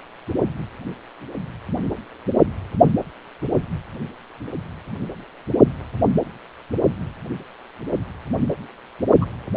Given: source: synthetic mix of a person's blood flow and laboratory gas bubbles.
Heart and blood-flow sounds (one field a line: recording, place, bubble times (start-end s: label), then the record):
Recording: Doppler ultrasound of blood flow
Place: precordium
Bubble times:
9.21-9.25 s: bubbles
From the record:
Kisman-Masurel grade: 112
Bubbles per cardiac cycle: 1 to 2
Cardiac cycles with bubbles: 1 to 10%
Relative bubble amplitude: moderate (0.250 to 0.450)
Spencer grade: 1 (occasional bubble signal discernible with the cardiac motion signal, with majority of cardiac periods free of bubbles)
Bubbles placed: only in the low amplitude regions of the cardiac cycle